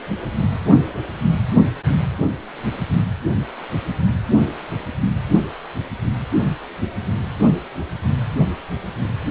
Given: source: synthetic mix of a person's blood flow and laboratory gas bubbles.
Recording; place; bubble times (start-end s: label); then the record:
Doppler ultrasound of blood flow; precordium
no bubbles
From the record:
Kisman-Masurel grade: 000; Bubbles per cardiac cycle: 0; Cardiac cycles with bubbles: 0%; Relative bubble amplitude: no bubbles discernible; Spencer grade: 0 (complete lack of bubble signals)